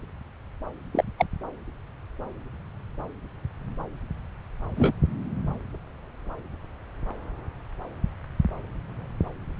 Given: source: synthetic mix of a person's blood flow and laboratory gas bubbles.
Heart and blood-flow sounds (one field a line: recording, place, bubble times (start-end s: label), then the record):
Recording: Doppler ultrasound of blood flow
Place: subclavian vein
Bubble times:
0.92-1.04 s: bubbles
1.18-1.26 s: bubbles
4.76-4.92 s: bubbles
From the record:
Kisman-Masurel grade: 122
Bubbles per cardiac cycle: 1 to 2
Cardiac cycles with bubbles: 10 to 50%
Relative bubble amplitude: moderate (0.250 to 0.450)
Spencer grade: 2 (many but less than half of the cardiac periods contain bubble signals, singularly or in groups)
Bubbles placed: anywhere in the cardiac cycle